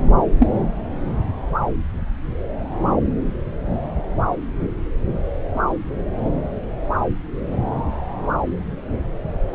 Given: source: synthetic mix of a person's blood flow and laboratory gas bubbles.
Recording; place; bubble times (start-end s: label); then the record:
Doppler ultrasound of blood flow; subclavian vein
0.39-0.51 s: bubbles
From the record:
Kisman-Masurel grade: 113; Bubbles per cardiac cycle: 1 to 2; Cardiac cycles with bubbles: 1 to 10%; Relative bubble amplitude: loud (0.450 to 0.775); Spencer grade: 1 (occasional bubble signal discernible with the cardiac motion signal, with majority of cardiac periods free of bubbles); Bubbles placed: anywhere in the cardiac cycle